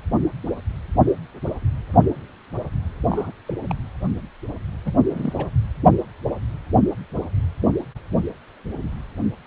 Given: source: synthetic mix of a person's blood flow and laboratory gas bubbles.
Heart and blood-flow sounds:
Doppler ultrasound of blood flow; precordium
3.10-3.31 s: bubbles
3.47-3.54 s: bubbles
3.70-3.75 s: bubbles
4.85-4.92 s: bubbles
5.10-5.50 s: bubbles
From the record:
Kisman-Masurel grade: 221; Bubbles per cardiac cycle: several, 3 to 8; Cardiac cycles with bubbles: 10 to 50%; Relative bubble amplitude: barely perceptible (0.100 to 0.250); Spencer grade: 2 (many but less than half of the cardiac periods contain bubble signals, singularly or in groups); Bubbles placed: anywhere in the cardiac cycle

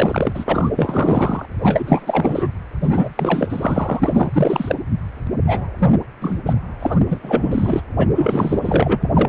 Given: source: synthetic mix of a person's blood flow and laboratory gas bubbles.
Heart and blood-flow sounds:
Doppler ultrasound of blood flow; precordium
0.00-0.45 s: bubbles
0.48-0.70 s: bubbles
0.75-1.46 s: bubbles
1.62-2.49 s: bubbles
2.81-4.75 s: bubbles
5.46-5.67 s: bubbles
5.79-5.97 s: bubbles
6.21-6.42 s: bubbles
6.46-6.55 s: bubbles
6.79-7.00 s: bubbles
7.09-7.82 s: bubbles
7.97-8.08 s: bubbles
8.15-9.00 s: bubbles
9.03-9.10 s: bubbles
9.13-9.29 s: bubbles
From the record:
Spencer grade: 4 (maximum detectable bubble signal sounding continuously throughout systole and diastole of every cardiac period, and overriding the amplitude of the normal cardiac signals); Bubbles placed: anywhere in the cardiac cycle

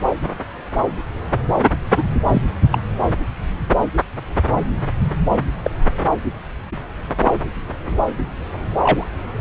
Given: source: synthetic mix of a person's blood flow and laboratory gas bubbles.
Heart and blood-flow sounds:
Doppler ultrasound of blood flow; subclavian vein
1.96-2.03 s: bubbles
2.23-2.42 s: bubbles
2.71-2.78 s: bubbles
5.62-5.71 s: bubbles
8.83-9.05 s: bubbles
From the record:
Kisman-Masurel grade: 122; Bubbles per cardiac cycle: 1 to 2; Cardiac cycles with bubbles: 10 to 50%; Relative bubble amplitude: moderate (0.250 to 0.450); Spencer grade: 2 (many but less than half of the cardiac periods contain bubble signals, singularly or in groups); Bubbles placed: anywhere in the cardiac cycle

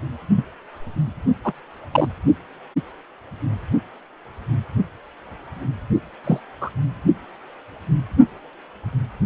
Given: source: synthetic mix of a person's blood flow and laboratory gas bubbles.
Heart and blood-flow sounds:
Doppler ultrasound of blood flow; precordium
0.35-0.44 s: bubbles
1.44-1.53 s: bubbles
1.92-2.08 s: bubbles
6.24-6.40 s: bubbles
6.61-6.70 s: bubbles
From the record:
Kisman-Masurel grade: 122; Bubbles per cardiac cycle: 1 to 2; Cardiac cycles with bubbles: 10 to 50%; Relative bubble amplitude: moderate (0.250 to 0.450); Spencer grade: 2 (many but less than half of the cardiac periods contain bubble signals, singularly or in groups); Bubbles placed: only in the low amplitude regions of the cardiac cycle

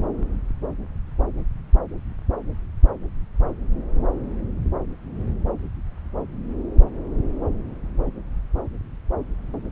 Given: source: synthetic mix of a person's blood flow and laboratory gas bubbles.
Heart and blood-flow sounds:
Doppler ultrasound of blood flow; subclavian vein
no bubbles
From the record:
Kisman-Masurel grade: 000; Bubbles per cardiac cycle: 0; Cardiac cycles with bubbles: 0%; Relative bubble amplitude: no bubbles discernible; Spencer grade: 0 (complete lack of bubble signals)

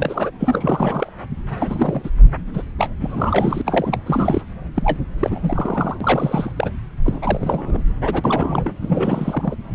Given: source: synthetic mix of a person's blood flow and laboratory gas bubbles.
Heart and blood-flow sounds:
Doppler ultrasound of blood flow; subclavian vein
0.00-0.30 s: bubbles
0.40-1.10 s: bubbles
1.49-2.10 s: bubbles
2.54-2.62 s: bubbles
2.78-2.89 s: bubbles
3.01-3.62 s: bubbles
3.64-3.98 s: bubbles
4.06-4.41 s: bubbles
4.74-5.00 s: bubbles
5.19-5.97 s: bubbles
6.00-6.52 s: bubbles
6.56-6.71 s: bubbles
7.04-7.82 s: bubbles
8.04-8.71 s: bubbles
8.82-9.55 s: bubbles
From the record:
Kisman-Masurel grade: 342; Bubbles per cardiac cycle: rolling drumbeat, 9 or more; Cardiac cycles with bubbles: 100%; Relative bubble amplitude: moderate (0.250 to 0.450); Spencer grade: 3 (all of the cardiac periods contain showers or single bubble signals, but not dominating or overriding the cardiac motion signals); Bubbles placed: anywhere in the cardiac cycle

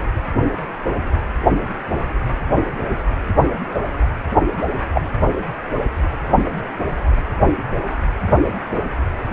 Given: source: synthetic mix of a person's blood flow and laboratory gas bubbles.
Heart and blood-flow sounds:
Doppler ultrasound of blood flow; precordium
4.94-5.02 s: bubbles
From the record:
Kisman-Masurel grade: 123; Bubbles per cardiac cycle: 1 to 2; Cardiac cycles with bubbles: 10 to 50%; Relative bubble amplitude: loud (0.450 to 0.775); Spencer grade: 2 (many but less than half of the cardiac periods contain bubble signals, singularly or in groups); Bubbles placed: anywhere in the cardiac cycle

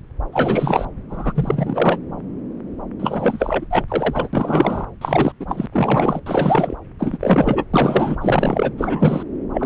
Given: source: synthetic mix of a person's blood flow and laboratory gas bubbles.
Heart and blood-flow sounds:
Doppler ultrasound of blood flow; subclavian vein
0.32-0.85 s: bubbles
1.09-1.99 s: bubbles
3.00-3.66 s: bubbles
3.71-3.84 s: bubbles
3.88-4.28 s: bubbles
4.33-4.85 s: bubbles
5.01-5.32 s: bubbles
5.40-5.66 s: bubbles
5.72-6.20 s: bubbles
6.26-6.75 s: bubbles
6.99-7.63 s: bubbles
7.74-8.16 s: bubbles
8.21-8.71 s: bubbles
8.77-9.23 s: bubbles
9.53-9.66 s: bubbles
From the record:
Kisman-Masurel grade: 333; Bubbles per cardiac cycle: rolling drumbeat, 9 or more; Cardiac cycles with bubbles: 50 to 99%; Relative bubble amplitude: loud (0.450 to 0.775); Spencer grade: 3 (all of the cardiac periods contain showers or single bubble signals, but not dominating or overriding the cardiac motion signals); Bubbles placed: anywhere in the cardiac cycle

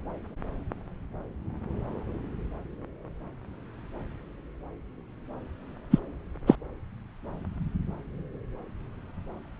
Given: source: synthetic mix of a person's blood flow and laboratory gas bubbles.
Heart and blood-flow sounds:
Doppler ultrasound of blood flow; subclavian vein
5.90-5.98 s: bubbles
6.46-6.55 s: bubbles
From the record:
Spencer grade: 1 (occasional bubble signal discernible with the cardiac motion signal, with majority of cardiac periods free of bubbles); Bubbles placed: anywhere in the cardiac cycle

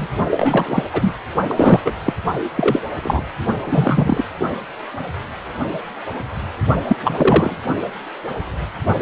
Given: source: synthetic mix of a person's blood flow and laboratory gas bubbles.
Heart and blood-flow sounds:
Doppler ultrasound of blood flow; precordium
0.00-0.07 s: bubbles
0.30-0.83 s: bubbles
0.93-1.16 s: bubbles
1.48-1.80 s: bubbles
1.85-1.92 s: bubbles
2.04-2.14 s: bubbles
2.56-2.81 s: bubbles
3.02-3.23 s: bubbles
3.64-4.25 s: bubbles
6.88-6.96 s: bubbles
7.04-7.59 s: bubbles
From the record:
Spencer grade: 3 (all of the cardiac periods contain showers or single bubble signals, but not dominating or overriding the cardiac motion signals); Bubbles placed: only in the low amplitude regions of the cardiac cycle

